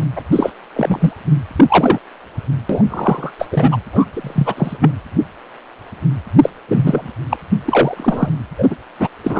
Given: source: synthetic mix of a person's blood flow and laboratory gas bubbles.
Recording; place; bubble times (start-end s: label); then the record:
Doppler ultrasound of blood flow; precordium
0.00-0.03 s: bubbles
0.16-0.21 s: bubbles
0.32-0.52 s: bubbles
0.76-1.12 s: bubbles
1.56-1.65 s: bubbles
1.69-1.98 s: bubbles
2.69-2.82 s: bubbles
2.88-3.32 s: bubbles
3.39-3.48 s: bubbles
3.51-3.77 s: bubbles
3.92-4.05 s: bubbles
4.13-4.54 s: bubbles
4.57-4.77 s: bubbles
4.81-4.90 s: bubbles
6.43-6.50 s: bubbles
6.68-7.11 s: bubbles
7.29-7.37 s: bubbles
7.65-8.29 s: bubbles
8.57-8.75 s: bubbles
8.99-9.08 s: bubbles
9.23-9.39 s: bubbles
From the record:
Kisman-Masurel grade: 233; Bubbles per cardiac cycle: several, 3 to 8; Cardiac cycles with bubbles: 50 to 99%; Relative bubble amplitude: loud (0.450 to 0.775); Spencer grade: 3 (all of the cardiac periods contain showers or single bubble signals, but not dominating or overriding the cardiac motion signals); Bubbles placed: anywhere in the cardiac cycle